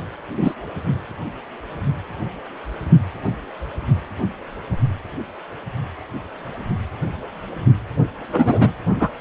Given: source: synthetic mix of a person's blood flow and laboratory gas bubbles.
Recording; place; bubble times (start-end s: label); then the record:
Doppler ultrasound of blood flow; precordium
0.37-0.54 s: bubbles
8.32-8.71 s: bubbles
8.99-9.09 s: bubbles
From the record:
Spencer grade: 2 (many but less than half of the cardiac periods contain bubble signals, singularly or in groups); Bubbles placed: only in the low amplitude regions of the cardiac cycle